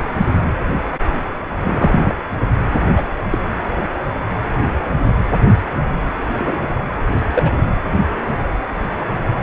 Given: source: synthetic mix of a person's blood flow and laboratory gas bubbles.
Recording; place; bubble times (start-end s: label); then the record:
Doppler ultrasound of blood flow; precordium
1.63-2.15 s: bubbles
2.96-3.03 s: bubbles
3.31-3.39 s: bubbles
6.32-6.67 s: bubbles
7.34-7.50 s: bubbles
From the record:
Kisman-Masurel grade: 123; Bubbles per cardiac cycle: 1 to 2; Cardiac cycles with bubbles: 10 to 50%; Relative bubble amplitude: loud (0.450 to 0.775); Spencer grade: 2 (many but less than half of the cardiac periods contain bubble signals, singularly or in groups); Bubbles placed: anywhere in the cardiac cycle